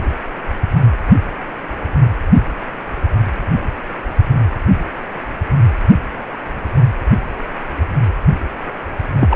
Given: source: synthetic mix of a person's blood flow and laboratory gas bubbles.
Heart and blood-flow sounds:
Doppler ultrasound of blood flow; precordium
9.20-9.36 s: bubbles
From the record:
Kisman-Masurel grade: 213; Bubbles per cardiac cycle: several, 3 to 8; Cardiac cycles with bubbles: 1 to 10%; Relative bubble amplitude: loud (0.450 to 0.775); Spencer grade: 1 (occasional bubble signal discernible with the cardiac motion signal, with majority of cardiac periods free of bubbles); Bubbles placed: anywhere in the cardiac cycle

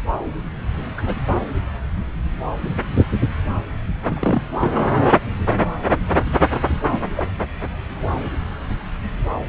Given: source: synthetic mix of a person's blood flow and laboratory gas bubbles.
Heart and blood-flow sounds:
Doppler ultrasound of blood flow; subclavian vein
0.97-1.02 s: bubbles
1.06-1.16 s: bubbles
4.05-4.42 s: bubbles
4.61-4.72 s: bubbles
6.91-6.98 s: bubbles
7.16-7.32 s: bubbles
From the record:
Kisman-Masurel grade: 122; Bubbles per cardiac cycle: 1 to 2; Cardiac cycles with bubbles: 10 to 50%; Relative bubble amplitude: moderate (0.250 to 0.450); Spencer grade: 2 (many but less than half of the cardiac periods contain bubble signals, singularly or in groups); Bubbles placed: anywhere in the cardiac cycle

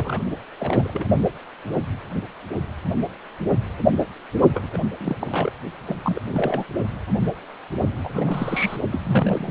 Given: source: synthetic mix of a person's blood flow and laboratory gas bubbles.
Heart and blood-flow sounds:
Doppler ultrasound of blood flow; precordium
0.00-0.21 s: bubbles
0.59-1.07 s: bubbles
4.53-4.67 s: bubbles
4.73-4.78 s: bubbles
4.99-5.15 s: bubbles
5.19-5.52 s: bubbles
5.86-5.98 s: bubbles
6.03-6.20 s: bubbles
6.25-6.65 s: bubbles
8.03-8.10 s: bubbles
8.13-8.76 s: bubbles
8.91-9.50 s: bubbles
From the record:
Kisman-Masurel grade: 332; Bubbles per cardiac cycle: rolling drumbeat, 9 or more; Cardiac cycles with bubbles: 50 to 99%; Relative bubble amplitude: moderate (0.250 to 0.450); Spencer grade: 3 (all of the cardiac periods contain showers or single bubble signals, but not dominating or overriding the cardiac motion signals); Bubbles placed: only in the low amplitude regions of the cardiac cycle

